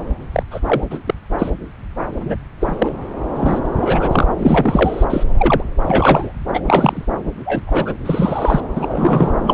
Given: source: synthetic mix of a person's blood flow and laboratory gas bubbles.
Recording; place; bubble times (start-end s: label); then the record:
Doppler ultrasound of blood flow; subclavian vein
0.34-0.43 s: bubbles
0.51-0.60 s: bubbles
0.66-0.83 s: bubbles
0.91-0.98 s: bubbles
1.06-1.15 s: bubbles
1.38-1.50 s: bubbles
2.20-2.35 s: bubbles
2.60-2.95 s: bubbles
3.35-3.60 s: bubbles
3.81-4.27 s: bubbles
4.38-5.04 s: bubbles
5.09-5.24 s: bubbles
5.38-5.63 s: bubbles
5.85-6.32 s: bubbles
6.54-6.61 s: bubbles
6.67-7.05 s: bubbles
7.46-7.64 s: bubbles
7.67-7.93 s: bubbles
8.05-8.60 s: bubbles
8.75-9.33 s: bubbles
9.43-9.53 s: bubbles
From the record:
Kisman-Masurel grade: 243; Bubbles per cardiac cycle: several, 3 to 8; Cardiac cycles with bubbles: 100%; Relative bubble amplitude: loud (0.450 to 0.775); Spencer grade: 3 (all of the cardiac periods contain showers or single bubble signals, but not dominating or overriding the cardiac motion signals); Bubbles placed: anywhere in the cardiac cycle